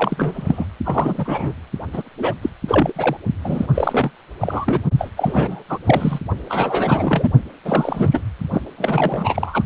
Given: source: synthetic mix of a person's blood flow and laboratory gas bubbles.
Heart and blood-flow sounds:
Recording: Doppler ultrasound of blood flow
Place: precordium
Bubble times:
0.00-0.66 s: bubbles
0.85-1.53 s: bubbles
1.93-2.03 s: bubbles
2.18-2.33 s: bubbles
2.43-2.50 s: bubbles
2.68-2.93 s: bubbles
2.96-3.17 s: bubbles
3.44-3.67 s: bubbles
3.74-4.11 s: bubbles
4.41-4.79 s: bubbles
4.98-5.10 s: bubbles
5.17-5.63 s: bubbles
5.69-5.78 s: bubbles
5.86-6.19 s: bubbles
6.49-7.29 s: bubbles
7.65-8.21 s: bubbles
8.51-8.61 s: bubbles
8.78-9.63 s: bubbles
From the record:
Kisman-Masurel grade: 343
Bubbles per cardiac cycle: rolling drumbeat, 9 or more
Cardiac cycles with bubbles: 100%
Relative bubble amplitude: loud (0.450 to 0.775)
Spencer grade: 3 (all of the cardiac periods contain showers or single bubble signals, but not dominating or overriding the cardiac motion signals)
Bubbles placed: only in the low amplitude regions of the cardiac cycle

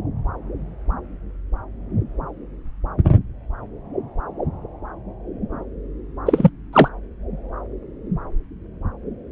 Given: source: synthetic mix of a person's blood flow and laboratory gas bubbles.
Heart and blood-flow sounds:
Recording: Doppler ultrasound of blood flow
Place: subclavian vein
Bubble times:
6.25-6.50 s: bubbles
6.72-6.88 s: bubbles
From the record:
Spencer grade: 1 (occasional bubble signal discernible with the cardiac motion signal, with majority of cardiac periods free of bubbles)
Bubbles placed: anywhere in the cardiac cycle

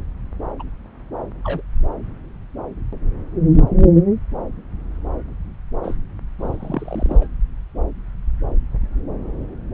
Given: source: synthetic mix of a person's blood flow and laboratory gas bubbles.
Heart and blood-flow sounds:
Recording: Doppler ultrasound of blood flow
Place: subclavian vein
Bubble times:
0.59-0.63 s: bubbles
1.44-1.62 s: bubbles
3.52-3.60 s: bubbles
5.83-5.94 s: bubbles
6.39-7.26 s: bubbles
From the record:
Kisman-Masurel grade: 121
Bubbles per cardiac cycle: 1 to 2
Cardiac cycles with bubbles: 10 to 50%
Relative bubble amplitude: barely perceptible (0.100 to 0.250)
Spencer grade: 2 (many but less than half of the cardiac periods contain bubble signals, singularly or in groups)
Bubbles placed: anywhere in the cardiac cycle

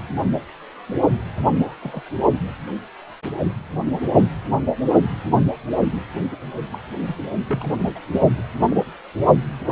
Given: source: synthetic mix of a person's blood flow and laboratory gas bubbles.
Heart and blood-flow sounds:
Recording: Doppler ultrasound of blood flow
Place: precordium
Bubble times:
1.48-1.75 s: bubbles
1.81-2.02 s: bubbles
6.32-6.36 s: bubbles
6.72-6.79 s: bubbles
7.05-7.16 s: bubbles
7.46-7.70 s: bubbles
7.95-8.00 s: bubbles
8.14-8.42 s: bubbles
8.70-8.76 s: bubbles
From the record:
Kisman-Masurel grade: 221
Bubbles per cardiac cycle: several, 3 to 8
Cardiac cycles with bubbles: 10 to 50%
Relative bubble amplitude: barely perceptible (0.100 to 0.250)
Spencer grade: 2 (many but less than half of the cardiac periods contain bubble signals, singularly or in groups)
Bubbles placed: only in the low amplitude regions of the cardiac cycle

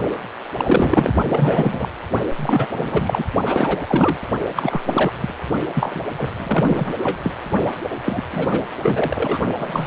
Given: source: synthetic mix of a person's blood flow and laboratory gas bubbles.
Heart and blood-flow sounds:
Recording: Doppler ultrasound of blood flow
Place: precordium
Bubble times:
0.58-1.14 s: bubbles
1.28-1.89 s: bubbles
2.37-2.67 s: bubbles
2.77-3.25 s: bubbles
3.45-4.17 s: bubbles
4.55-4.81 s: bubbles
4.88-5.11 s: bubbles
5.21-5.34 s: bubbles
5.75-6.03 s: bubbles
6.17-6.31 s: bubbles
6.36-6.93 s: bubbles
7.03-7.20 s: bubbles
7.23-7.33 s: bubbles
8.05-8.24 s: bubbles
8.33-8.68 s: bubbles
8.83-9.38 s: bubbles
9.58-9.87 s: bubbles
From the record:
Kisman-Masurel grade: 343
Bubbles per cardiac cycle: rolling drumbeat, 9 or more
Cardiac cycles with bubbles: 100%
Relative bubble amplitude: loud (0.450 to 0.775)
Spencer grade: 3 (all of the cardiac periods contain showers or single bubble signals, but not dominating or overriding the cardiac motion signals)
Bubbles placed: only in the low amplitude regions of the cardiac cycle

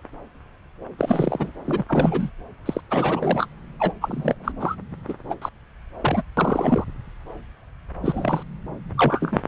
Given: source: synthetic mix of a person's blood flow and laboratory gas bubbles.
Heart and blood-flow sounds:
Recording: Doppler ultrasound of blood flow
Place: subclavian vein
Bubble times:
0.98-1.51 s: bubbles
1.66-1.83 s: bubbles
1.89-2.30 s: bubbles
2.66-2.81 s: bubbles
2.91-3.46 s: bubbles
3.79-3.93 s: bubbles
4.01-4.34 s: bubbles
4.44-4.52 s: bubbles
4.60-4.76 s: bubbles
5.08-5.14 s: bubbles
5.29-5.34 s: bubbles
5.42-5.49 s: bubbles
6.01-6.22 s: bubbles
6.37-6.84 s: bubbles
8.03-8.43 s: bubbles
8.97-9.40 s: bubbles
From the record:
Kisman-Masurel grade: 232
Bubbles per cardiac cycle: several, 3 to 8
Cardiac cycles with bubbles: 50 to 99%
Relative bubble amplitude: moderate (0.250 to 0.450)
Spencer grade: 3 (all of the cardiac periods contain showers or single bubble signals, but not dominating or overriding the cardiac motion signals)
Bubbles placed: anywhere in the cardiac cycle

